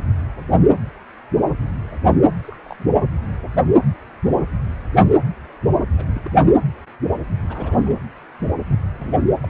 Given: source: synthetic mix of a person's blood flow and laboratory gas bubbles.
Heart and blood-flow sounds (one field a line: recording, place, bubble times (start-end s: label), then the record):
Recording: Doppler ultrasound of blood flow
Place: precordium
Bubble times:
2.43-2.57 s: bubbles
2.66-2.76 s: bubbles
2.79-2.84 s: bubbles
5.97-6.04 s: bubbles
6.15-6.22 s: bubbles
6.25-6.32 s: bubbles
6.45-6.48 s: bubbles
7.43-7.94 s: bubbles
8.70-8.79 s: bubbles
8.99-9.28 s: bubbles
9.42-9.47 s: bubbles
From the record:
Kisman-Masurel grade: 221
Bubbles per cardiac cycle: several, 3 to 8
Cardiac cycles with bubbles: 10 to 50%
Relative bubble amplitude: barely perceptible (0.100 to 0.250)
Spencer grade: 2 (many but less than half of the cardiac periods contain bubble signals, singularly or in groups)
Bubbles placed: anywhere in the cardiac cycle